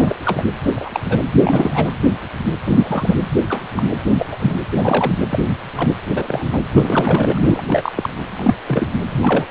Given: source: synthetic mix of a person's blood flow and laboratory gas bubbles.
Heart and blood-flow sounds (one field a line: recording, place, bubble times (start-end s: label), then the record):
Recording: Doppler ultrasound of blood flow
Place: precordium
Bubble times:
0.00-0.16 s: bubbles
0.24-0.43 s: bubbles
0.62-0.72 s: bubbles
0.76-1.00 s: bubbles
1.09-1.18 s: bubbles
1.43-1.91 s: bubbles
2.65-3.17 s: bubbles
3.50-3.61 s: bubbles
3.75-3.83 s: bubbles
4.18-4.27 s: bubbles
4.29-4.55 s: bubbles
4.75-5.20 s: bubbles
5.29-5.44 s: bubbles
5.75-5.89 s: bubbles
6.11-6.60 s: bubbles
6.74-7.41 s: bubbles
7.46-7.62 s: bubbles
7.67-7.92 s: bubbles
7.97-8.09 s: bubbles
8.30-8.54 s: bubbles
8.67-8.88 s: bubbles
9.09-9.46 s: bubbles
From the record:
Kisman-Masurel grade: 232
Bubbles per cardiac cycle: several, 3 to 8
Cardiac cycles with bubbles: 50 to 99%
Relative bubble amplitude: moderate (0.250 to 0.450)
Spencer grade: 3 (all of the cardiac periods contain showers or single bubble signals, but not dominating or overriding the cardiac motion signals)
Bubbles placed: anywhere in the cardiac cycle